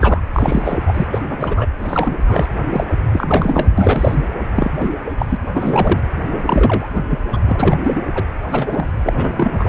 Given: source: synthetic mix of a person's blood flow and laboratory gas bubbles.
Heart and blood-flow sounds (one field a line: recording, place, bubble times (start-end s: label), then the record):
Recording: Doppler ultrasound of blood flow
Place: precordium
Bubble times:
0.00-0.20 s: bubbles
0.34-0.78 s: bubbles
0.86-1.06 s: bubbles
1.13-1.19 s: bubbles
1.29-1.67 s: bubbles
1.77-2.17 s: bubbles
2.25-2.49 s: bubbles
2.70-2.85 s: bubbles
3.12-3.69 s: bubbles
3.77-4.25 s: bubbles
4.54-4.92 s: bubbles
5.04-5.16 s: bubbles
5.19-5.26 s: bubbles
5.29-5.37 s: bubbles
5.54-6.00 s: bubbles
6.31-6.87 s: bubbles
6.95-7.04 s: bubbles
7.10-7.18 s: bubbles
7.33-7.40 s: bubbles
7.46-7.77 s: bubbles
7.84-8.02 s: bubbles
8.14-8.27 s: bubbles
8.48-8.87 s: bubbles
9.04-9.69 s: bubbles
From the record:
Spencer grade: 3 (all of the cardiac periods contain showers or single bubble signals, but not dominating or overriding the cardiac motion signals)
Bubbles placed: anywhere in the cardiac cycle